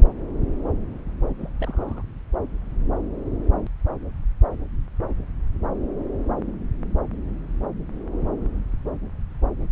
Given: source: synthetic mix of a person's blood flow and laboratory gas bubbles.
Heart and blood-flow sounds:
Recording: Doppler ultrasound of blood flow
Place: subclavian vein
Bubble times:
1.40-1.50 s: bubbles
1.59-2.02 s: bubbles
From the record:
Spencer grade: 1 (occasional bubble signal discernible with the cardiac motion signal, with majority of cardiac periods free of bubbles)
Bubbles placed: anywhere in the cardiac cycle

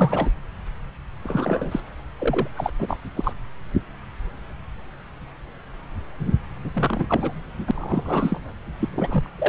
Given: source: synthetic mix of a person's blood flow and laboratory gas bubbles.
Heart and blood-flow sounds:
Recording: Doppler ultrasound of blood flow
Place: subclavian vein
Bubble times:
0.00-0.30 s: bubbles
1.24-1.80 s: bubbles
2.19-2.48 s: bubbles
2.56-2.71 s: bubbles
2.79-2.98 s: bubbles
3.15-3.33 s: bubbles
6.73-7.32 s: bubbles
7.67-8.53 s: bubbles
8.79-8.89 s: bubbles
8.91-9.28 s: bubbles
9.38-9.49 s: bubbles
From the record:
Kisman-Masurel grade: 332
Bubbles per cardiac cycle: rolling drumbeat, 9 or more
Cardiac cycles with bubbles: 50 to 99%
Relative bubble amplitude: moderate (0.250 to 0.450)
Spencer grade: 3 (all of the cardiac periods contain showers or single bubble signals, but not dominating or overriding the cardiac motion signals)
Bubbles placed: anywhere in the cardiac cycle

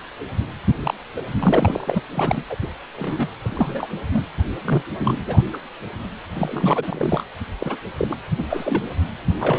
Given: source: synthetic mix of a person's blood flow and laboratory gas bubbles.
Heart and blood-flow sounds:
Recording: Doppler ultrasound of blood flow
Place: precordium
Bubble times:
0.82-0.94 s: bubbles
1.16-1.21 s: bubbles
1.39-2.02 s: bubbles
2.14-2.42 s: bubbles
2.49-2.56 s: bubbles
2.62-2.68 s: bubbles
2.97-3.28 s: bubbles
3.40-3.90 s: bubbles
4.12-4.24 s: bubbles
4.64-4.82 s: bubbles
5.00-5.19 s: bubbles
5.26-5.42 s: bubbles
5.53-5.58 s: bubbles
6.35-7.25 s: bubbles
7.59-7.76 s: bubbles
7.98-8.16 s: bubbles
8.38-8.44 s: bubbles
8.50-8.95 s: bubbles
9.30-9.59 s: bubbles
From the record:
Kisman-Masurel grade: 232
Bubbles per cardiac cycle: several, 3 to 8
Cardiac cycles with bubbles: 50 to 99%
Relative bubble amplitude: moderate (0.250 to 0.450)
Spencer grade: 3 (all of the cardiac periods contain showers or single bubble signals, but not dominating or overriding the cardiac motion signals)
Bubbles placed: anywhere in the cardiac cycle

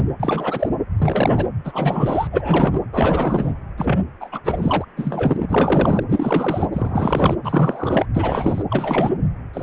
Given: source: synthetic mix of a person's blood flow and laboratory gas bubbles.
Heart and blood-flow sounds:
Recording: Doppler ultrasound of blood flow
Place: precordium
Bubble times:
0.00-0.03 s: bubbles
0.19-0.69 s: bubbles
0.96-1.46 s: bubbles
1.65-2.27 s: bubbles
2.32-2.81 s: bubbles
2.92-3.54 s: bubbles
3.77-4.00 s: bubbles
4.20-4.29 s: bubbles
4.32-4.40 s: bubbles
4.45-4.85 s: bubbles
4.96-6.04 s: bubbles
6.08-6.67 s: bubbles
6.72-7.34 s: bubbles
7.43-8.06 s: bubbles
8.14-8.63 s: bubbles
8.70-9.16 s: bubbles
9.53-9.63 s: bubbles
From the record:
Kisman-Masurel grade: 343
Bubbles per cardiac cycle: rolling drumbeat, 9 or more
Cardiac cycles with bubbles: 100%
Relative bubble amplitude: loud (0.450 to 0.775)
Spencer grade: 3 (all of the cardiac periods contain showers or single bubble signals, but not dominating or overriding the cardiac motion signals)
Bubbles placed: anywhere in the cardiac cycle

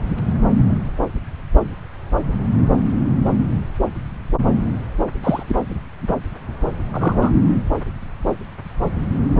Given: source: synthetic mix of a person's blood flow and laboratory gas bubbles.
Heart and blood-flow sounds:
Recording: Doppler ultrasound of blood flow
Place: subclavian vein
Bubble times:
5.24-5.43 s: bubbles
5.49-5.55 s: bubbles
6.93-7.31 s: bubbles
From the record:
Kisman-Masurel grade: 113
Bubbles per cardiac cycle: 1 to 2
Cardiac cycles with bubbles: 1 to 10%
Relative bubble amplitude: loud (0.450 to 0.775)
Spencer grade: 1 (occasional bubble signal discernible with the cardiac motion signal, with majority of cardiac periods free of bubbles)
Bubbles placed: anywhere in the cardiac cycle

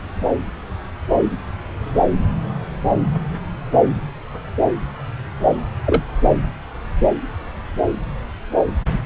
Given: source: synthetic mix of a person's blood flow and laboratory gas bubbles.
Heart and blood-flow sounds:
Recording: Doppler ultrasound of blood flow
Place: subclavian vein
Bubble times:
5.85-6.03 s: bubbles
From the record:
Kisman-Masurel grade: 113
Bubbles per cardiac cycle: 1 to 2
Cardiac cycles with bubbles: 1 to 10%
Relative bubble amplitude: loud (0.450 to 0.775)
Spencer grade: 1 (occasional bubble signal discernible with the cardiac motion signal, with majority of cardiac periods free of bubbles)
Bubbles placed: anywhere in the cardiac cycle

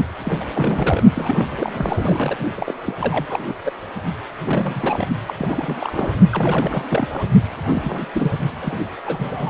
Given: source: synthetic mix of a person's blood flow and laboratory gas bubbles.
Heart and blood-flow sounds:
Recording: Doppler ultrasound of blood flow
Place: precordium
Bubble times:
0.24-0.45 s: bubbles
0.53-1.03 s: bubbles
1.15-2.38 s: bubbles
2.54-2.73 s: bubbles
2.86-2.93 s: bubbles
3.00-3.25 s: bubbles
3.28-3.53 s: bubbles
3.65-3.73 s: bubbles
4.43-5.07 s: bubbles
5.27-5.34 s: bubbles
5.38-5.78 s: bubbles
5.80-6.14 s: bubbles
6.29-6.84 s: bubbles
6.89-7.08 s: bubbles
7.12-7.26 s: bubbles
7.66-8.05 s: bubbles
8.12-8.31 s: bubbles
8.59-8.79 s: bubbles
9.05-9.50 s: bubbles
From the record:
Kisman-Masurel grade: 342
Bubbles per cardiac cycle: rolling drumbeat, 9 or more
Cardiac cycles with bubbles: 100%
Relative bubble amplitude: moderate (0.250 to 0.450)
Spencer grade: 3 (all of the cardiac periods contain showers or single bubble signals, but not dominating or overriding the cardiac motion signals)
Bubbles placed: only in the low amplitude regions of the cardiac cycle

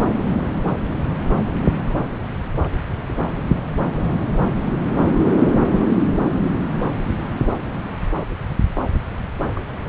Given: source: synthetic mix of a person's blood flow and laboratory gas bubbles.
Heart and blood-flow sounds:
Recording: Doppler ultrasound of blood flow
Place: subclavian vein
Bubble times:
2.60-2.68 s: bubbles
3.09-3.13 s: bubbles
5.70-5.87 s: bubbles
6.17-6.23 s: bubbles
9.55-9.67 s: bubbles
From the record:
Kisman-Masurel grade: 121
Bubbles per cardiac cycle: 1 to 2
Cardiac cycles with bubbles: 10 to 50%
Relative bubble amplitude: barely perceptible (0.100 to 0.250)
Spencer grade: 2 (many but less than half of the cardiac periods contain bubble signals, singularly or in groups)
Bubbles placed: anywhere in the cardiac cycle

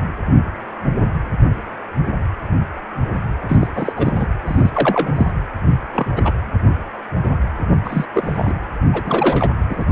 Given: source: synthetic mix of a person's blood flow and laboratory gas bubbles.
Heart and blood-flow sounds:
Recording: Doppler ultrasound of blood flow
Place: precordium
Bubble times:
3.49-3.56 s: bubbles
3.60-3.68 s: bubbles
3.75-3.93 s: bubbles
3.95-4.28 s: bubbles
4.46-4.71 s: bubbles
4.73-5.32 s: bubbles
5.92-6.21 s: bubbles
6.25-6.32 s: bubbles
7.84-8.05 s: bubbles
8.14-8.53 s: bubbles
8.92-9.50 s: bubbles
9.69-9.85 s: bubbles
From the record:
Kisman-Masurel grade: 232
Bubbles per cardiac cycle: several, 3 to 8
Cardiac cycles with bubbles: 50 to 99%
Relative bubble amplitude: moderate (0.250 to 0.450)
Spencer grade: 3 (all of the cardiac periods contain showers or single bubble signals, but not dominating or overriding the cardiac motion signals)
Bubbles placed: anywhere in the cardiac cycle

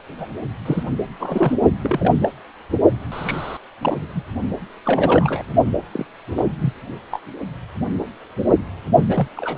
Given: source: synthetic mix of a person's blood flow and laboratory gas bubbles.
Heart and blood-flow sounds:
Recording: Doppler ultrasound of blood flow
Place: precordium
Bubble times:
0.18-0.27 s: bubbles
0.65-0.83 s: bubbles
1.19-1.53 s: bubbles
1.82-2.13 s: bubbles
2.21-2.28 s: bubbles
3.11-3.57 s: bubbles
3.81-3.98 s: bubbles
4.01-4.23 s: bubbles
4.85-5.42 s: bubbles
5.93-6.06 s: bubbles
6.35-6.46 s: bubbles
6.62-6.74 s: bubbles
7.11-7.20 s: bubbles
9.08-9.28 s: bubbles
9.37-9.58 s: bubbles
From the record:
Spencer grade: 3 (all of the cardiac periods contain showers or single bubble signals, but not dominating or overriding the cardiac motion signals)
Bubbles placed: only in the low amplitude regions of the cardiac cycle

